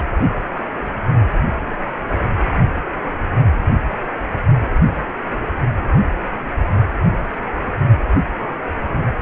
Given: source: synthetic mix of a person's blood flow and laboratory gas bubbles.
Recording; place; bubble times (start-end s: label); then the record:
Doppler ultrasound of blood flow; precordium
0.00-0.02 s: bubbles
From the record:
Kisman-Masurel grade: 113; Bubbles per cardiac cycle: 1 to 2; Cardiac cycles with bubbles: 1 to 10%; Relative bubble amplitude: loud (0.450 to 0.775); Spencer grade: 1 (occasional bubble signal discernible with the cardiac motion signal, with majority of cardiac periods free of bubbles); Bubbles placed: only in the low amplitude regions of the cardiac cycle